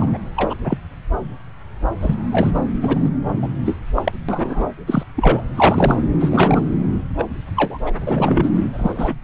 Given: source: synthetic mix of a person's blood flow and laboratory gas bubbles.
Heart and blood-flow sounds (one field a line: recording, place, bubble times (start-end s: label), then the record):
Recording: Doppler ultrasound of blood flow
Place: subclavian vein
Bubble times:
0.00-0.18 s: bubbles
0.36-0.56 s: bubbles
0.64-0.77 s: bubbles
2.00-2.15 s: bubbles
2.31-2.50 s: bubbles
2.54-2.60 s: bubbles
2.81-3.09 s: bubbles
3.42-3.48 s: bubbles
3.65-3.77 s: bubbles
3.95-4.12 s: bubbles
4.29-4.67 s: bubbles
4.87-5.04 s: bubbles
5.15-5.42 s: bubbles
5.55-6.02 s: bubbles
6.20-6.64 s: bubbles
7.18-7.24 s: bubbles
7.55-7.79 s: bubbles
7.86-7.91 s: bubbles
8.01-8.51 s: bubbles
8.72-9.15 s: bubbles
From the record:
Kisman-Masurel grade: 233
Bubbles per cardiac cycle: several, 3 to 8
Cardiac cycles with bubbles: 50 to 99%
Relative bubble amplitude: loud (0.450 to 0.775)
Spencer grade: 3 (all of the cardiac periods contain showers or single bubble signals, but not dominating or overriding the cardiac motion signals)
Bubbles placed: anywhere in the cardiac cycle